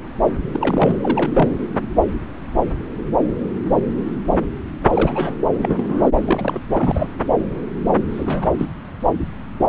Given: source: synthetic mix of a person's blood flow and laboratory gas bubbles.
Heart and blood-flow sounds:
Doppler ultrasound of blood flow; subclavian vein
0.51-1.49 s: bubbles
4.85-5.35 s: bubbles
5.62-6.09 s: bubbles
6.25-6.59 s: bubbles
6.68-7.09 s: bubbles
8.12-8.51 s: bubbles
8.58-8.66 s: bubbles
From the record:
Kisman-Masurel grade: 222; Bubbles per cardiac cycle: several, 3 to 8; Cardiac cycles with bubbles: 10 to 50%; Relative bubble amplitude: moderate (0.250 to 0.450); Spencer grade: 2 (many but less than half of the cardiac periods contain bubble signals, singularly or in groups); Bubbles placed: anywhere in the cardiac cycle

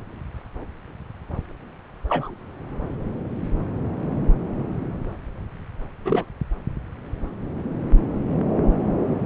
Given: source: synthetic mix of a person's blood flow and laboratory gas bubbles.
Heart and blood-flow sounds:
Doppler ultrasound of blood flow; subclavian vein
2.08-2.35 s: bubbles
6.05-6.25 s: bubbles
From the record:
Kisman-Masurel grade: 123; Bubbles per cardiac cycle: 1 to 2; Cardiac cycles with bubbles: 10 to 50%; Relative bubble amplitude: loud (0.450 to 0.775); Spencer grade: 2 (many but less than half of the cardiac periods contain bubble signals, singularly or in groups); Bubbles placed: anywhere in the cardiac cycle

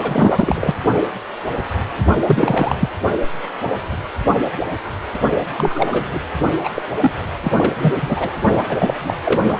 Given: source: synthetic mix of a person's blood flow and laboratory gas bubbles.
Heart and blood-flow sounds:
Doppler ultrasound of blood flow; precordium
0.03-0.74 s: bubbles
2.27-2.75 s: bubbles
2.79-2.90 s: bubbles
5.57-5.87 s: bubbles
5.92-6.08 s: bubbles
6.13-6.19 s: bubbles
6.63-6.70 s: bubbles
6.75-6.83 s: bubbles
7.00-7.12 s: bubbles
7.42-7.52 s: bubbles
7.56-7.73 s: bubbles
7.78-7.94 s: bubbles
8.02-8.30 s: bubbles
8.69-9.17 s: bubbles
9.25-9.41 s: bubbles
9.46-9.60 s: bubbles
From the record:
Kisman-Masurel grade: 332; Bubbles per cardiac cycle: rolling drumbeat, 9 or more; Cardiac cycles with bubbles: 50 to 99%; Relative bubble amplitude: moderate (0.250 to 0.450); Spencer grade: 3 (all of the cardiac periods contain showers or single bubble signals, but not dominating or overriding the cardiac motion signals); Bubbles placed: only in the low amplitude regions of the cardiac cycle

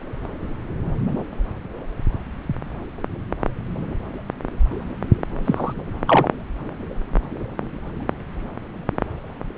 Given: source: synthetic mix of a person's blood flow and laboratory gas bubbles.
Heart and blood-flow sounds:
Doppler ultrasound of blood flow; subclavian vein
5.44-5.74 s: bubbles
6.07-6.29 s: bubbles
From the record:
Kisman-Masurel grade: 223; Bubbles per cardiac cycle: several, 3 to 8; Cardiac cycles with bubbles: 10 to 50%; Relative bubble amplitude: loud (0.450 to 0.775); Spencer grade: 2 (many but less than half of the cardiac periods contain bubble signals, singularly or in groups); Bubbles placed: anywhere in the cardiac cycle

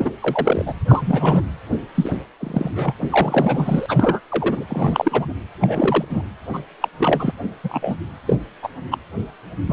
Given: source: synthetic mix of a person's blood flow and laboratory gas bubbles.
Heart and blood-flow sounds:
Doppler ultrasound of blood flow; precordium
0.00-0.12 s: bubbles
0.21-0.74 s: bubbles
0.88-1.43 s: bubbles
1.95-2.11 s: bubbles
2.39-2.95 s: bubbles
3.08-4.20 s: bubbles
4.29-4.64 s: bubbles
4.69-5.33 s: bubbles
5.61-6.05 s: bubbles
6.09-6.25 s: bubbles
6.53-6.60 s: bubbles
6.81-6.88 s: bubbles
6.99-7.33 s: bubbles
7.63-7.99 s: bubbles
8.26-8.36 s: bubbles
8.62-8.69 s: bubbles
8.90-8.98 s: bubbles
9.66-9.73 s: bubbles
From the record:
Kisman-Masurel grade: 243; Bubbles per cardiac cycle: several, 3 to 8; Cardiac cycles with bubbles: 100%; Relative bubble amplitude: loud (0.450 to 0.775); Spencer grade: 3 (all of the cardiac periods contain showers or single bubble signals, but not dominating or overriding the cardiac motion signals); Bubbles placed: anywhere in the cardiac cycle

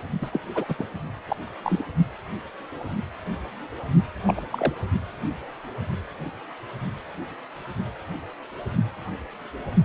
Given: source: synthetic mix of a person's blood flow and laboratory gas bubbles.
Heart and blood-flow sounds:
Doppler ultrasound of blood flow; precordium
0.12-0.18 s: bubbles
0.22-0.30 s: bubbles
0.33-0.40 s: bubbles
0.54-0.65 s: bubbles
0.68-0.75 s: bubbles
0.78-0.86 s: bubbles
1.27-1.36 s: bubbles
1.64-1.84 s: bubbles
4.27-4.34 s: bubbles
4.37-4.41 s: bubbles
4.50-4.75 s: bubbles
From the record:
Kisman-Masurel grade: 221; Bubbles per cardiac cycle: several, 3 to 8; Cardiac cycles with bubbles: 10 to 50%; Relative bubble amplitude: barely perceptible (0.100 to 0.250); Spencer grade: 2 (many but less than half of the cardiac periods contain bubble signals, singularly or in groups); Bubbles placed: only in the low amplitude regions of the cardiac cycle

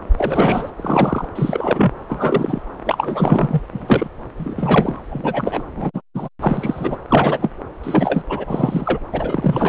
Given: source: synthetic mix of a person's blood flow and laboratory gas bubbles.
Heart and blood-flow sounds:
Doppler ultrasound of blood flow; subclavian vein
0.18-0.70 s: bubbles
0.78-1.26 s: bubbles
1.35-1.92 s: bubbles
2.08-2.62 s: bubbles
2.85-3.61 s: bubbles
3.73-4.08 s: bubbles
4.37-5.00 s: bubbles
5.10-5.63 s: bubbles
5.75-5.91 s: bubbles
5.94-6.01 s: bubbles
6.14-6.28 s: bubbles
6.41-6.97 s: bubbles
7.08-7.50 s: bubbles
7.83-8.23 s: bubbles
8.29-8.44 s: bubbles
8.46-8.99 s: bubbles
9.12-9.69 s: bubbles
From the record:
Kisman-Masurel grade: 243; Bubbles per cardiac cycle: several, 3 to 8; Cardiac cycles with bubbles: 100%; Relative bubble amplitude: loud (0.450 to 0.775); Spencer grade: 3 (all of the cardiac periods contain showers or single bubble signals, but not dominating or overriding the cardiac motion signals); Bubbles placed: anywhere in the cardiac cycle

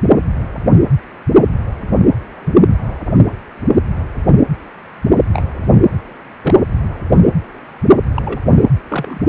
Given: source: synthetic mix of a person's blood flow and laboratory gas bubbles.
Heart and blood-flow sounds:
Doppler ultrasound of blood flow; precordium
5.33-5.43 s: bubbles
6.42-6.59 s: bubbles
8.14-8.40 s: bubbles
8.88-9.21 s: bubbles
From the record:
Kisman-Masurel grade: 122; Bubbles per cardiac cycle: 1 to 2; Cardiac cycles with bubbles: 10 to 50%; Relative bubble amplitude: moderate (0.250 to 0.450); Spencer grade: 2 (many but less than half of the cardiac periods contain bubble signals, singularly or in groups); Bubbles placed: anywhere in the cardiac cycle

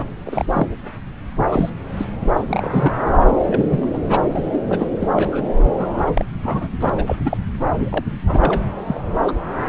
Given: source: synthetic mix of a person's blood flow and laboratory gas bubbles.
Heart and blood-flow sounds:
Doppler ultrasound of blood flow; subclavian vein
0.00-0.05 s: bubbles
0.26-0.45 s: bubbles
0.52-0.67 s: bubbles
1.50-1.70 s: bubbles
1.97-2.06 s: bubbles
2.34-2.44 s: bubbles
2.47-2.99 s: bubbles
3.41-3.88 s: bubbles
3.93-3.99 s: bubbles
4.08-4.21 s: bubbles
4.34-4.42 s: bubbles
4.52-4.63 s: bubbles
4.67-4.90 s: bubbles
5.00-5.08 s: bubbles
5.16-5.42 s: bubbles
5.78-6.11 s: bubbles
6.15-6.25 s: bubbles
6.43-6.67 s: bubbles
6.81-6.90 s: bubbles
6.96-7.16 s: bubbles
7.25-7.37 s: bubbles
7.78-8.04 s: bubbles
8.26-8.63 s: bubbles
8.86-9.00 s: bubbles
9.27-9.32 s: bubbles
From the record:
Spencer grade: 3 (all of the cardiac periods contain showers or single bubble signals, but not dominating or overriding the cardiac motion signals); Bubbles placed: anywhere in the cardiac cycle

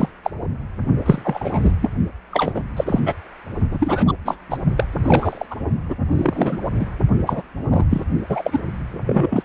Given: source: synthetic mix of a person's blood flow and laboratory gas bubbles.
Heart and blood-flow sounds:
Doppler ultrasound of blood flow; precordium
0.00-0.09 s: bubbles
0.24-0.30 s: bubbles
1.06-1.73 s: bubbles
1.81-1.90 s: bubbles
2.31-2.62 s: bubbles
2.76-3.00 s: bubbles
3.06-3.15 s: bubbles
3.71-4.13 s: bubbles
4.25-4.37 s: bubbles
4.50-4.58 s: bubbles
4.76-4.85 s: bubbles
5.04-5.46 s: bubbles
5.50-5.55 s: bubbles
5.88-5.96 s: bubbles
6.12-6.58 s: bubbles
6.79-6.87 s: bubbles
7.26-7.42 s: bubbles
7.71-7.85 s: bubbles
7.89-8.04 s: bubbles
8.29-8.60 s: bubbles
9.06-9.43 s: bubbles
From the record:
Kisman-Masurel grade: 243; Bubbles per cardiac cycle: several, 3 to 8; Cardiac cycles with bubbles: 100%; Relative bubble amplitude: loud (0.450 to 0.775); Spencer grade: 3 (all of the cardiac periods contain showers or single bubble signals, but not dominating or overriding the cardiac motion signals); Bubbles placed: only in the low amplitude regions of the cardiac cycle

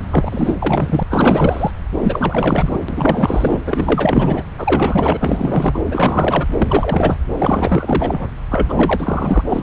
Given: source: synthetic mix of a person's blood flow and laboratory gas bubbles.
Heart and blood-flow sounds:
Doppler ultrasound of blood flow; subclavian vein
0.09-0.54 s: bubbles
0.59-1.03 s: bubbles
1.09-1.71 s: bubbles
1.98-2.79 s: bubbles
2.88-3.59 s: bubbles
3.66-4.43 s: bubbles
4.57-5.81 s: bubbles
5.91-6.46 s: bubbles
6.59-7.17 s: bubbles
7.38-8.28 s: bubbles
8.51-9.42 s: bubbles
9.47-9.63 s: bubbles
From the record:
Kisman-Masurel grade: 444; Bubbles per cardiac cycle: continuous sound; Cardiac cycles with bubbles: 100%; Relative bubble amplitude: maximal (0.775 to 0.999); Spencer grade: 4 (maximum detectable bubble signal sounding continuously throughout systole and diastole of every cardiac period, and overriding the amplitude of the normal cardiac signals); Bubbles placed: anywhere in the cardiac cycle

